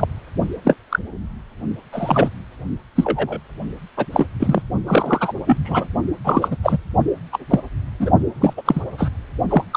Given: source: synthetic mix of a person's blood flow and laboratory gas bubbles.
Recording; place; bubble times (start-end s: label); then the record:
Doppler ultrasound of blood flow; precordium
0.00-0.06 s: bubbles
0.65-0.77 s: bubbles
0.89-0.99 s: bubbles
1.92-2.30 s: bubbles
2.96-3.40 s: bubbles
3.97-4.06 s: bubbles
4.12-4.25 s: bubbles
4.39-4.62 s: bubbles
4.87-5.33 s: bubbles
5.46-5.57 s: bubbles
5.65-5.87 s: bubbles
6.24-6.57 s: bubbles
6.63-6.79 s: bubbles
7.32-7.39 s: bubbles
7.50-7.60 s: bubbles
7.99-8.11 s: bubbles
8.40-8.54 s: bubbles
8.56-8.62 s: bubbles
8.65-8.81 s: bubbles
8.97-9.09 s: bubbles
9.49-9.64 s: bubbles
9.71-9.77 s: bubbles
From the record:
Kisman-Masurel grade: 243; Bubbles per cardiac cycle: several, 3 to 8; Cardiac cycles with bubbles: 100%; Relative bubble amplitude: loud (0.450 to 0.775); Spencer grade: 3 (all of the cardiac periods contain showers or single bubble signals, but not dominating or overriding the cardiac motion signals); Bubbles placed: only in the low amplitude regions of the cardiac cycle